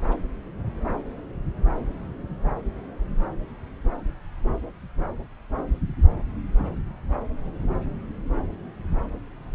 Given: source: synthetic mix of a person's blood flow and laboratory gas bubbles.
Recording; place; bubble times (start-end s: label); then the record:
Doppler ultrasound of blood flow; subclavian vein
no bubbles
From the record:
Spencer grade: 0 (complete lack of bubble signals)